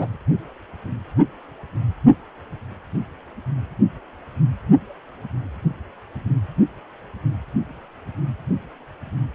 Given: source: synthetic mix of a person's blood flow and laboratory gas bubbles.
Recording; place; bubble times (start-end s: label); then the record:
Doppler ultrasound of blood flow; precordium
0.00-0.17 s: bubbles
From the record:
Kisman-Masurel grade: 123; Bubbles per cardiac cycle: 1 to 2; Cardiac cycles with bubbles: 10 to 50%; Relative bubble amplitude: loud (0.450 to 0.775); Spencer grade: 2 (many but less than half of the cardiac periods contain bubble signals, singularly or in groups); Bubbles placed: only in the low amplitude regions of the cardiac cycle